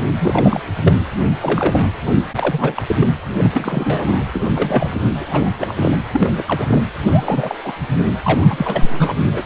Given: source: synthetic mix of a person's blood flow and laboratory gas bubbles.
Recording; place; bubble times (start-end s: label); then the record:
Doppler ultrasound of blood flow; precordium
0.20-0.61 s: bubbles
0.77-0.93 s: bubbles
1.40-1.88 s: bubbles
2.35-2.84 s: bubbles
2.88-2.96 s: bubbles
3.00-3.08 s: bubbles
3.37-4.25 s: bubbles
4.33-4.46 s: bubbles
4.54-4.91 s: bubbles
5.20-5.50 s: bubbles
5.58-6.04 s: bubbles
6.12-6.44 s: bubbles
6.46-6.83 s: bubbles
7.06-7.57 s: bubbles
7.65-7.73 s: bubbles
8.24-9.14 s: bubbles
9.33-9.43 s: bubbles
From the record:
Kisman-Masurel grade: 332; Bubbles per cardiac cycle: rolling drumbeat, 9 or more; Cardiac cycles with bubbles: 50 to 99%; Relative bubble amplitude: moderate (0.250 to 0.450); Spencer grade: 3 (all of the cardiac periods contain showers or single bubble signals, but not dominating or overriding the cardiac motion signals); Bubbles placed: anywhere in the cardiac cycle